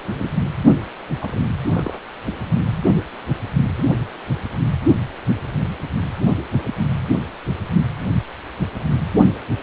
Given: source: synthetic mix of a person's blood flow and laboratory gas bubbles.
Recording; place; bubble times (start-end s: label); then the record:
Doppler ultrasound of blood flow; precordium
0.09-0.33 s: bubbles
1.21-1.42 s: bubbles
1.66-2.00 s: bubbles
3.78-3.85 s: bubbles
From the record:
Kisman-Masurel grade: 121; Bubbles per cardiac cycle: 1 to 2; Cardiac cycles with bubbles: 10 to 50%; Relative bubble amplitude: barely perceptible (0.100 to 0.250); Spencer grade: 2 (many but less than half of the cardiac periods contain bubble signals, singularly or in groups); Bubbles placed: anywhere in the cardiac cycle